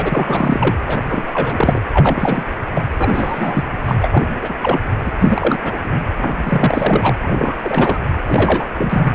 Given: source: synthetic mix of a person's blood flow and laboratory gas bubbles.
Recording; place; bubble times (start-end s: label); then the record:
Doppler ultrasound of blood flow; precordium
0.00-0.76 s: bubbles
0.86-1.82 s: bubbles
1.93-2.43 s: bubbles
2.74-2.82 s: bubbles
2.97-3.64 s: bubbles
3.85-3.95 s: bubbles
4.02-4.23 s: bubbles
4.42-4.54 s: bubbles
4.61-4.80 s: bubbles
5.04-5.12 s: bubbles
5.20-5.59 s: bubbles
5.63-5.81 s: bubbles
5.84-6.00 s: bubbles
6.17-6.33 s: bubbles
6.46-7.15 s: bubbles
7.21-7.55 s: bubbles
7.60-7.98 s: bubbles
8.27-8.66 s: bubbles
8.77-9.15 s: bubbles
From the record:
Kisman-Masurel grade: 343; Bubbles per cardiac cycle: rolling drumbeat, 9 or more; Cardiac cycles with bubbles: 100%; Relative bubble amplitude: loud (0.450 to 0.775); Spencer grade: 3 (all of the cardiac periods contain showers or single bubble signals, but not dominating or overriding the cardiac motion signals); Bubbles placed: anywhere in the cardiac cycle